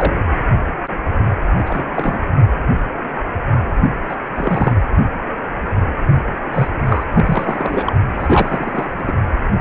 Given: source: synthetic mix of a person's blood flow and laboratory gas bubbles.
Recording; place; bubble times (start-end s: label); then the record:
Doppler ultrasound of blood flow; precordium
0.00-0.15 s: bubbles
1.55-1.85 s: bubbles
1.91-2.23 s: bubbles
4.09-4.17 s: bubbles
4.35-4.76 s: bubbles
6.51-6.68 s: bubbles
6.87-7.04 s: bubbles
7.13-7.92 s: bubbles
8.19-9.12 s: bubbles
From the record:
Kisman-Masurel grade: 232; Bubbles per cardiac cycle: several, 3 to 8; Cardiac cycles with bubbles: 50 to 99%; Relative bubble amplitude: moderate (0.250 to 0.450); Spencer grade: 3 (all of the cardiac periods contain showers or single bubble signals, but not dominating or overriding the cardiac motion signals); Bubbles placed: anywhere in the cardiac cycle